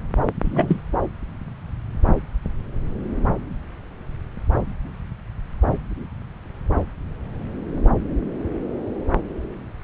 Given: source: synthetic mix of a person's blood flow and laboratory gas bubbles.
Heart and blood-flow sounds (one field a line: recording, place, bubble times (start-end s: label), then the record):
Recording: Doppler ultrasound of blood flow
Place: subclavian vein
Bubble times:
0.45-0.81 s: bubbles
From the record:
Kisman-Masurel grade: 212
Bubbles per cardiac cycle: several, 3 to 8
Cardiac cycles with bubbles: 1 to 10%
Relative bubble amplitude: moderate (0.250 to 0.450)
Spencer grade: 1 (occasional bubble signal discernible with the cardiac motion signal, with majority of cardiac periods free of bubbles)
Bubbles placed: anywhere in the cardiac cycle